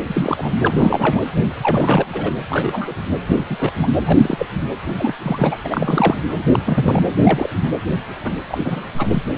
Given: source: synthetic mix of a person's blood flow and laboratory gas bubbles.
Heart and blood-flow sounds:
Doppler ultrasound of blood flow; precordium
0.07-0.52 s: bubbles
0.63-1.26 s: bubbles
1.61-2.05 s: bubbles
2.13-2.31 s: bubbles
2.49-2.92 s: bubbles
3.29-3.45 s: bubbles
3.50-3.56 s: bubbles
3.59-3.72 s: bubbles
3.82-3.88 s: bubbles
4.05-4.46 s: bubbles
4.88-4.93 s: bubbles
4.97-5.14 s: bubbles
5.22-5.57 s: bubbles
5.64-6.15 s: bubbles
6.49-6.59 s: bubbles
6.66-7.00 s: bubbles
7.23-7.50 s: bubbles
8.24-8.34 s: bubbles
8.47-8.84 s: bubbles
8.98-9.23 s: bubbles
From the record:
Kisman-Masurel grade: 232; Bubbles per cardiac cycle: several, 3 to 8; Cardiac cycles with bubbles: 50 to 99%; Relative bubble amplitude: moderate (0.250 to 0.450); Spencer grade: 3 (all of the cardiac periods contain showers or single bubble signals, but not dominating or overriding the cardiac motion signals); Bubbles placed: anywhere in the cardiac cycle

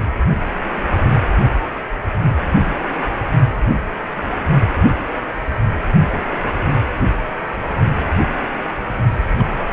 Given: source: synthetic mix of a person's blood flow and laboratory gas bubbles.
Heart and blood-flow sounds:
Doppler ultrasound of blood flow; precordium
9.19-9.26 s: bubbles
9.39-9.54 s: bubbles
9.60-9.67 s: bubbles
9.71-9.73 s: bubbles
From the record:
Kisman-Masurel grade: 211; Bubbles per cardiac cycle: several, 3 to 8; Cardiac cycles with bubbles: 1 to 10%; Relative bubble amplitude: barely perceptible (0.100 to 0.250); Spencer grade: 1 (occasional bubble signal discernible with the cardiac motion signal, with majority of cardiac periods free of bubbles); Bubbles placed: only in the low amplitude regions of the cardiac cycle

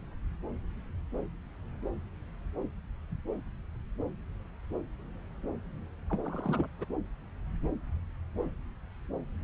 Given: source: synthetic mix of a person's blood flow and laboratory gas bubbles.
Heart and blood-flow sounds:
Doppler ultrasound of blood flow; subclavian vein
6.10-6.19 s: bubbles
6.25-6.67 s: bubbles
6.78-6.84 s: bubbles
From the record:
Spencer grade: 1 (occasional bubble signal discernible with the cardiac motion signal, with majority of cardiac periods free of bubbles); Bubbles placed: anywhere in the cardiac cycle

